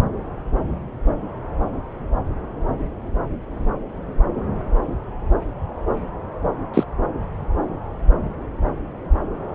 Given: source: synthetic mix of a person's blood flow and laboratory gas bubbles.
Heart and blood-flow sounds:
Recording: Doppler ultrasound of blood flow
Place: subclavian vein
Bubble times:
6.74-6.83 s: bubbles
From the record:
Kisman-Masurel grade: 113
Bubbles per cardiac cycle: 1 to 2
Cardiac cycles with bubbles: 1 to 10%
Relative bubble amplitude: loud (0.450 to 0.775)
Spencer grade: 1 (occasional bubble signal discernible with the cardiac motion signal, with majority of cardiac periods free of bubbles)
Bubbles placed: anywhere in the cardiac cycle

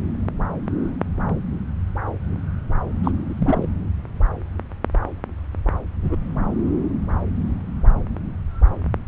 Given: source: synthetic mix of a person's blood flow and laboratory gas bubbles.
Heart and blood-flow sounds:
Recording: Doppler ultrasound of blood flow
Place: subclavian vein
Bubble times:
3.03-3.11 s: bubbles
3.25-3.67 s: bubbles
6.02-6.17 s: bubbles
From the record:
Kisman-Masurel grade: 112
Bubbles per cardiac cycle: 1 to 2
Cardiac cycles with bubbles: 1 to 10%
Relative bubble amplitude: moderate (0.250 to 0.450)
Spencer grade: 1 (occasional bubble signal discernible with the cardiac motion signal, with majority of cardiac periods free of bubbles)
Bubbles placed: anywhere in the cardiac cycle

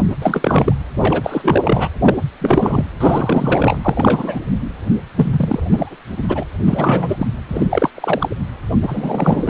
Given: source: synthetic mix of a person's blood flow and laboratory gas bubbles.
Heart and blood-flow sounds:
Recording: Doppler ultrasound of blood flow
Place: precordium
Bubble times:
0.10-0.15 s: bubbles
0.21-0.72 s: bubbles
0.98-1.89 s: bubbles
2.01-2.16 s: bubbles
2.39-2.85 s: bubbles
3.00-3.79 s: bubbles
3.83-4.40 s: bubbles
5.15-5.60 s: bubbles
5.71-5.96 s: bubbles
6.17-6.43 s: bubbles
6.65-7.26 s: bubbles
7.48-7.67 s: bubbles
7.69-7.90 s: bubbles
7.94-8.29 s: bubbles
8.82-9.50 s: bubbles
From the record:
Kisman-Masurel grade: 343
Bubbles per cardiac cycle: rolling drumbeat, 9 or more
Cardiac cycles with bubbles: 100%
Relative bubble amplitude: loud (0.450 to 0.775)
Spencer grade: 3 (all of the cardiac periods contain showers or single bubble signals, but not dominating or overriding the cardiac motion signals)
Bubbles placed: anywhere in the cardiac cycle

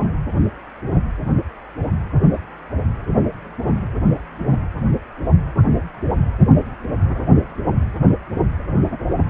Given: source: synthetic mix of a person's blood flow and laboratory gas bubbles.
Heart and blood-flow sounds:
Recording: Doppler ultrasound of blood flow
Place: precordium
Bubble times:
no bubbles
From the record:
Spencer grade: 0 (complete lack of bubble signals)

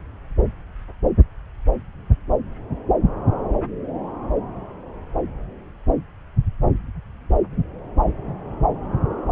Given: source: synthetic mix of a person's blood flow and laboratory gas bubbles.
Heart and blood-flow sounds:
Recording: Doppler ultrasound of blood flow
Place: subclavian vein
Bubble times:
no bubbles
From the record:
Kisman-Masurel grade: 000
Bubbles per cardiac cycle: 0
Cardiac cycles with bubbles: 0%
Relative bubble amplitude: no bubbles discernible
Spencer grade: 0 (complete lack of bubble signals)

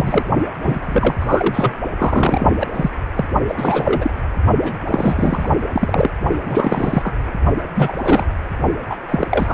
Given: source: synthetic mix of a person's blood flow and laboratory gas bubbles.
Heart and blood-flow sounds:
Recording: Doppler ultrasound of blood flow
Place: precordium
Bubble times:
0.00-0.22 s: bubbles
0.62-1.16 s: bubbles
1.20-1.74 s: bubbles
1.98-2.51 s: bubbles
2.59-2.67 s: bubbles
2.72-2.90 s: bubbles
3.16-3.25 s: bubbles
3.47-4.13 s: bubbles
4.61-4.83 s: bubbles
4.88-5.50 s: bubbles
5.72-6.11 s: bubbles
6.46-7.14 s: bubbles
7.75-8.26 s: bubbles
8.89-8.96 s: bubbles
9.08-9.27 s: bubbles
9.29-9.54 s: bubbles
From the record:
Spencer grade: 3 (all of the cardiac periods contain showers or single bubble signals, but not dominating or overriding the cardiac motion signals)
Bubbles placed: only in the low amplitude regions of the cardiac cycle

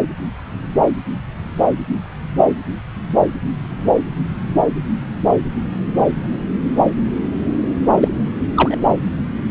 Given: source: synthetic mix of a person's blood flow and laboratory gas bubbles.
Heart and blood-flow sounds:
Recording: Doppler ultrasound of blood flow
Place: subclavian vein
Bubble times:
8.00-8.08 s: bubbles
8.56-8.78 s: bubbles
From the record:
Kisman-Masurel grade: 113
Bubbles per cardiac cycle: 1 to 2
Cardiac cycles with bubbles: 1 to 10%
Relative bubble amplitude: loud (0.450 to 0.775)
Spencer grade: 1 (occasional bubble signal discernible with the cardiac motion signal, with majority of cardiac periods free of bubbles)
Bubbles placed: anywhere in the cardiac cycle

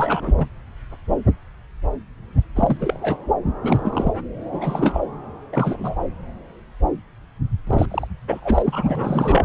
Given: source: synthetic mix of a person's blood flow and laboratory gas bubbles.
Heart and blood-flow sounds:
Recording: Doppler ultrasound of blood flow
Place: subclavian vein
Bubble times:
0.00-0.33 s: bubbles
0.37-0.46 s: bubbles
2.55-3.17 s: bubbles
3.62-4.12 s: bubbles
4.51-5.00 s: bubbles
5.52-5.95 s: bubbles
7.67-7.86 s: bubbles
7.91-8.07 s: bubbles
8.27-9.45 s: bubbles
From the record:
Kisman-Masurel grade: 332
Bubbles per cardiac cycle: rolling drumbeat, 9 or more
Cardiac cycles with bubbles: 50 to 99%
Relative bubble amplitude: moderate (0.250 to 0.450)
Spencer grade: 3 (all of the cardiac periods contain showers or single bubble signals, but not dominating or overriding the cardiac motion signals)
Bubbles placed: anywhere in the cardiac cycle

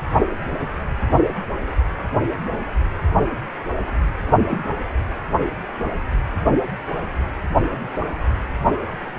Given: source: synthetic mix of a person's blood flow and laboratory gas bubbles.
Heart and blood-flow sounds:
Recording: Doppler ultrasound of blood flow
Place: precordium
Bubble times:
4.26-4.32 s: bubbles
4.50-4.64 s: bubbles
From the record:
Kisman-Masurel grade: 112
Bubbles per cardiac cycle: 1 to 2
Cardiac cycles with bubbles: 1 to 10%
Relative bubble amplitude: moderate (0.250 to 0.450)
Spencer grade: 1 (occasional bubble signal discernible with the cardiac motion signal, with majority of cardiac periods free of bubbles)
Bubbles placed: anywhere in the cardiac cycle

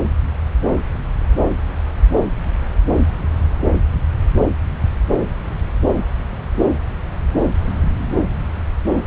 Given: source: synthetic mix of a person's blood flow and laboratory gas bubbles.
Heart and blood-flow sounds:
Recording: Doppler ultrasound of blood flow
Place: subclavian vein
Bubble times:
no bubbles
From the record:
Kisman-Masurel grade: 000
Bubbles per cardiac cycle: 0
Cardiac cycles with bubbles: 0%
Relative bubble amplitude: no bubbles discernible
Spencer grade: 0 (complete lack of bubble signals)

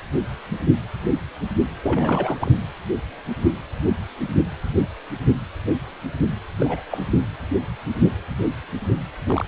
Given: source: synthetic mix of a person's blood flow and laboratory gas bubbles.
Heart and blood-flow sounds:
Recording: Doppler ultrasound of blood flow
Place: precordium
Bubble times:
1.82-2.52 s: bubbles
6.60-6.83 s: bubbles
6.90-7.06 s: bubbles
9.26-9.45 s: bubbles
From the record:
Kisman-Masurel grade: 221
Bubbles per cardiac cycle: several, 3 to 8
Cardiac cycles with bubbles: 10 to 50%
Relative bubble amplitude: barely perceptible (0.100 to 0.250)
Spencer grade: 2 (many but less than half of the cardiac periods contain bubble signals, singularly or in groups)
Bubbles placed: anywhere in the cardiac cycle

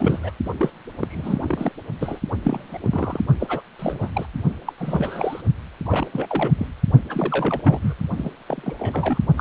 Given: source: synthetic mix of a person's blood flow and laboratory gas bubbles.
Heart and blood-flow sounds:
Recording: Doppler ultrasound of blood flow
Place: precordium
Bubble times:
0.00-0.31 s: bubbles
0.45-0.49 s: bubbles
0.57-0.70 s: bubbles
1.02-1.72 s: bubbles
1.99-2.20 s: bubbles
2.43-2.78 s: bubbles
2.81-3.21 s: bubbles
3.40-3.61 s: bubbles
3.79-4.11 s: bubbles
4.13-4.26 s: bubbles
4.65-4.73 s: bubbles
4.78-5.41 s: bubbles
5.86-6.07 s: bubbles
6.13-6.51 s: bubbles
6.57-6.66 s: bubbles
7.09-7.61 s: bubbles
7.64-7.94 s: bubbles
8.17-8.30 s: bubbles
8.48-8.74 s: bubbles
8.79-9.19 s: bubbles
9.38-9.41 s: bubbles
From the record:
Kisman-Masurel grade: 342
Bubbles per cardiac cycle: rolling drumbeat, 9 or more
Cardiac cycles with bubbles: 100%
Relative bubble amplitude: moderate (0.250 to 0.450)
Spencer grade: 3 (all of the cardiac periods contain showers or single bubble signals, but not dominating or overriding the cardiac motion signals)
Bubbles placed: only in the low amplitude regions of the cardiac cycle

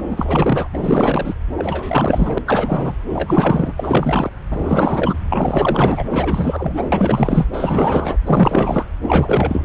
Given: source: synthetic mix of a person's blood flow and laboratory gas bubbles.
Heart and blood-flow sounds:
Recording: Doppler ultrasound of blood flow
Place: subclavian vein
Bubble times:
0.09-0.68 s: bubbles
0.73-1.35 s: bubbles
1.56-2.38 s: bubbles
2.46-2.94 s: bubbles
3.09-4.33 s: bubbles
4.50-5.18 s: bubbles
5.29-6.04 s: bubbles
6.10-6.88 s: bubbles
6.92-7.46 s: bubbles
7.53-8.17 s: bubbles
8.24-8.86 s: bubbles
9.02-9.65 s: bubbles
From the record:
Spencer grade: 4 (maximum detectable bubble signal sounding continuously throughout systole and diastole of every cardiac period, and overriding the amplitude of the normal cardiac signals)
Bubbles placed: anywhere in the cardiac cycle

